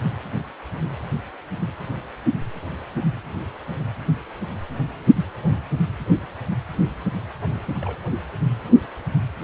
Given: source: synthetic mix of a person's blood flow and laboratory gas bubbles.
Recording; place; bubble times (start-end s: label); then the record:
Doppler ultrasound of blood flow; precordium
7.75-7.78 s: bubbles
7.81-7.96 s: bubbles
8.11-8.17 s: bubbles
From the record:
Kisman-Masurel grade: 211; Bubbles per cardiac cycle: several, 3 to 8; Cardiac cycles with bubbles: 1 to 10%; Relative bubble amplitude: barely perceptible (0.100 to 0.250); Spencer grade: 1 (occasional bubble signal discernible with the cardiac motion signal, with majority of cardiac periods free of bubbles); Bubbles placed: anywhere in the cardiac cycle